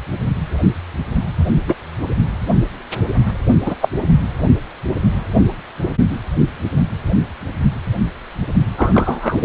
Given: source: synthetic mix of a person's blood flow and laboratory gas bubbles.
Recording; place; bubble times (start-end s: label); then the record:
Doppler ultrasound of blood flow; precordium
1.67-1.75 s: bubbles
3.65-3.74 s: bubbles
3.82-3.88 s: bubbles
8.77-9.38 s: bubbles
From the record:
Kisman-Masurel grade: 123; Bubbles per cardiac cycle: 1 to 2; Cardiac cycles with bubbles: 10 to 50%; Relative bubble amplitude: loud (0.450 to 0.775); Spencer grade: 2 (many but less than half of the cardiac periods contain bubble signals, singularly or in groups); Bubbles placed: only in the low amplitude regions of the cardiac cycle